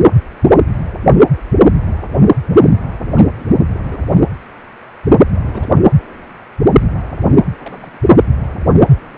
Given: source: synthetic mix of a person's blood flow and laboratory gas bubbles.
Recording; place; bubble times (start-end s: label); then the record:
Doppler ultrasound of blood flow; precordium
2.99-3.09 s: bubbles
3.12-3.31 s: bubbles
3.35-3.45 s: bubbles
3.73-3.78 s: bubbles
3.84-4.00 s: bubbles
4.04-4.21 s: bubbles
5.36-5.42 s: bubbles
5.46-5.72 s: bubbles
7.58-7.97 s: bubbles
8.08-8.29 s: bubbles
From the record:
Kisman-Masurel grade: 221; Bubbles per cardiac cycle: several, 3 to 8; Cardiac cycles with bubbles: 10 to 50%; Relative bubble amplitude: barely perceptible (0.100 to 0.250); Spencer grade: 2 (many but less than half of the cardiac periods contain bubble signals, singularly or in groups); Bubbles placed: anywhere in the cardiac cycle